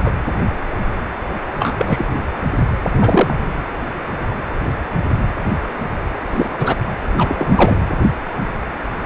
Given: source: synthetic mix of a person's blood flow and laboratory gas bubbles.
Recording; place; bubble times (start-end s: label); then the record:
Doppler ultrasound of blood flow; precordium
0.04-0.12 s: bubbles
1.59-2.05 s: bubbles
2.96-3.34 s: bubbles
6.31-6.49 s: bubbles
6.57-6.77 s: bubbles
7.17-7.79 s: bubbles
From the record:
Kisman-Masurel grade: 223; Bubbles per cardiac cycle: several, 3 to 8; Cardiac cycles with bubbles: 10 to 50%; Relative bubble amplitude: loud (0.450 to 0.775); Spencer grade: 2 (many but less than half of the cardiac periods contain bubble signals, singularly or in groups); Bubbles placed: anywhere in the cardiac cycle